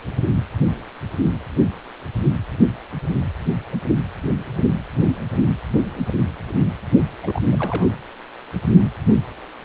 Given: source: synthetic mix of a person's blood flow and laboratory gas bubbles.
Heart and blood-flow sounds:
Doppler ultrasound of blood flow; precordium
7.23-7.42 s: bubbles
7.52-7.56 s: bubbles
7.58-7.88 s: bubbles
From the record:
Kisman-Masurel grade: 211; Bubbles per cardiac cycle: several, 3 to 8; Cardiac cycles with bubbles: 1 to 10%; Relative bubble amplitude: barely perceptible (0.100 to 0.250); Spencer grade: 1 (occasional bubble signal discernible with the cardiac motion signal, with majority of cardiac periods free of bubbles); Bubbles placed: anywhere in the cardiac cycle

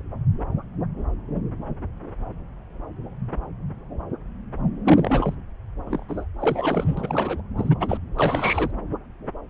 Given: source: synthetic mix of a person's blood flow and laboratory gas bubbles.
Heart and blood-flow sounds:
Doppler ultrasound of blood flow; subclavian vein
4.84-5.34 s: bubbles
5.86-6.04 s: bubbles
6.08-6.24 s: bubbles
6.40-7.42 s: bubbles
7.57-7.75 s: bubbles
7.80-7.98 s: bubbles
8.17-8.71 s: bubbles
From the record:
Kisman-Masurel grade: 221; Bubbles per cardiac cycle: several, 3 to 8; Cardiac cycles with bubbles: 10 to 50%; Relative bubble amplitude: barely perceptible (0.100 to 0.250); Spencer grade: 2 (many but less than half of the cardiac periods contain bubble signals, singularly or in groups); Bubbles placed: anywhere in the cardiac cycle

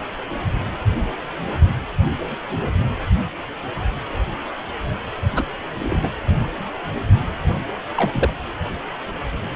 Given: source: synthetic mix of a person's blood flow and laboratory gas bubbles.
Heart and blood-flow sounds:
Doppler ultrasound of blood flow; precordium
5.35-5.44 s: bubbles
5.80-6.10 s: bubbles
7.96-8.33 s: bubbles
From the record:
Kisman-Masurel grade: 122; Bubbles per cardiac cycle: 1 to 2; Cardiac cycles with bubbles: 10 to 50%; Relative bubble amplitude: moderate (0.250 to 0.450); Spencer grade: 2 (many but less than half of the cardiac periods contain bubble signals, singularly or in groups); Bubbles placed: anywhere in the cardiac cycle

